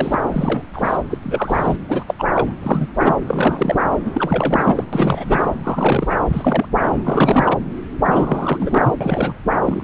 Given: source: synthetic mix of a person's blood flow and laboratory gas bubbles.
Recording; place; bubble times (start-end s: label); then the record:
Doppler ultrasound of blood flow; subclavian vein
0.00-0.19 s: bubbles
0.31-0.62 s: bubbles
0.73-0.97 s: bubbles
1.09-1.18 s: bubbles
1.23-1.77 s: bubbles
1.88-2.05 s: bubbles
2.07-2.14 s: bubbles
2.19-2.25 s: bubbles
2.34-2.54 s: bubbles
2.62-2.87 s: bubbles
2.99-3.17 s: bubbles
3.27-3.78 s: bubbles
4.05-4.84 s: bubbles
4.92-5.54 s: bubbles
5.63-6.16 s: bubbles
6.32-6.69 s: bubbles
6.79-7.58 s: bubbles
8.05-8.97 s: bubbles
9.01-9.39 s: bubbles
9.62-9.84 s: bubbles
From the record:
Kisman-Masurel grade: 343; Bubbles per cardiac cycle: rolling drumbeat, 9 or more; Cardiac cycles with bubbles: 100%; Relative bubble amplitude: loud (0.450 to 0.775); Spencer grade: 3 (all of the cardiac periods contain showers or single bubble signals, but not dominating or overriding the cardiac motion signals); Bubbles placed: anywhere in the cardiac cycle